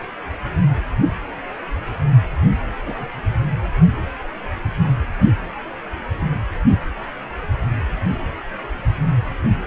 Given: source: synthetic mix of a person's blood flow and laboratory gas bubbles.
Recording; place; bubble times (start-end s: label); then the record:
Doppler ultrasound of blood flow; precordium
2.85-3.08 s: bubbles
From the record:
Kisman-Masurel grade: 112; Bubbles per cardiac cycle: 1 to 2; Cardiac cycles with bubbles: 1 to 10%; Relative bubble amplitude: moderate (0.250 to 0.450); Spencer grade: 1 (occasional bubble signal discernible with the cardiac motion signal, with majority of cardiac periods free of bubbles); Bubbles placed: anywhere in the cardiac cycle